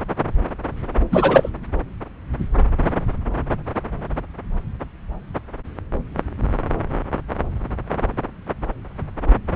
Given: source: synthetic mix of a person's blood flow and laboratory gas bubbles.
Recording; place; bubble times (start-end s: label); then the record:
Doppler ultrasound of blood flow; subclavian vein
1.11-1.49 s: bubbles
From the record:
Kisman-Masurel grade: 213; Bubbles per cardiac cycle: several, 3 to 8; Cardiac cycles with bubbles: 1 to 10%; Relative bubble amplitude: loud (0.450 to 0.775); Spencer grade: 1 (occasional bubble signal discernible with the cardiac motion signal, with majority of cardiac periods free of bubbles); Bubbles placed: anywhere in the cardiac cycle